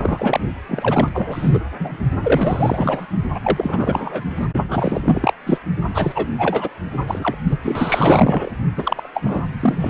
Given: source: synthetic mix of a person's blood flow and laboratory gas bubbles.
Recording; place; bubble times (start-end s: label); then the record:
Doppler ultrasound of blood flow; precordium
0.00-0.40 s: bubbles
0.68-1.10 s: bubbles
1.12-1.60 s: bubbles
1.79-1.97 s: bubbles
2.24-3.06 s: bubbles
3.34-3.40 s: bubbles
3.43-4.23 s: bubbles
4.29-4.47 s: bubbles
4.68-5.33 s: bubbles
5.46-5.59 s: bubbles
5.94-6.28 s: bubbles
6.38-6.70 s: bubbles
7.07-7.37 s: bubbles
7.50-7.58 s: bubbles
7.62-8.51 s: bubbles
8.76-9.09 s: bubbles
9.13-9.46 s: bubbles
9.60-9.90 s: bubbles
From the record:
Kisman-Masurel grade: 444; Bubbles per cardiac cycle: continuous sound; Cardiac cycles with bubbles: 100%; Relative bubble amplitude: maximal (0.775 to 0.999); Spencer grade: 4 (maximum detectable bubble signal sounding continuously throughout systole and diastole of every cardiac period, and overriding the amplitude of the normal cardiac signals); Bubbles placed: only in the low amplitude regions of the cardiac cycle